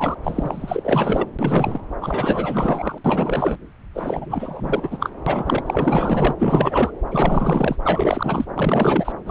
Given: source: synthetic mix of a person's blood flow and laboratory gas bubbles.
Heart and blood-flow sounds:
Doppler ultrasound of blood flow; subclavian vein
0.00-0.15 s: bubbles
0.24-1.26 s: bubbles
1.39-1.80 s: bubbles
2.00-2.99 s: bubbles
3.04-3.57 s: bubbles
3.94-5.11 s: bubbles
5.26-5.62 s: bubbles
5.67-6.35 s: bubbles
6.39-6.92 s: bubbles
7.11-7.76 s: bubbles
7.84-8.45 s: bubbles
8.55-9.12 s: bubbles
9.26-9.31 s: bubbles
From the record:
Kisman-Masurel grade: 444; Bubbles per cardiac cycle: continuous sound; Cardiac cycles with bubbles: 100%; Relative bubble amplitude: maximal (0.775 to 0.999); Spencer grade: 4 (maximum detectable bubble signal sounding continuously throughout systole and diastole of every cardiac period, and overriding the amplitude of the normal cardiac signals); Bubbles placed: anywhere in the cardiac cycle

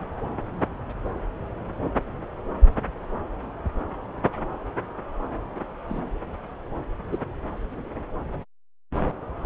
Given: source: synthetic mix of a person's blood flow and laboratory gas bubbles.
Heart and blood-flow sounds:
Doppler ultrasound of blood flow; subclavian vein
5.89-6.02 s: bubbles
7.12-7.18 s: bubbles
From the record:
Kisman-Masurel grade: 123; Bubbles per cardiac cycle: 1 to 2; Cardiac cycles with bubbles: 10 to 50%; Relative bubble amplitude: loud (0.450 to 0.775); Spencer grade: 2 (many but less than half of the cardiac periods contain bubble signals, singularly or in groups); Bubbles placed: anywhere in the cardiac cycle

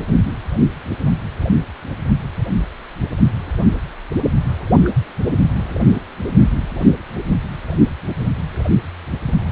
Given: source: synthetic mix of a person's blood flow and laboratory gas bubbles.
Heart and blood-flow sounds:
Doppler ultrasound of blood flow; precordium
4.84-4.90 s: bubbles
5.50-5.56 s: bubbles
From the record:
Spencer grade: 1 (occasional bubble signal discernible with the cardiac motion signal, with majority of cardiac periods free of bubbles); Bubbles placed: anywhere in the cardiac cycle

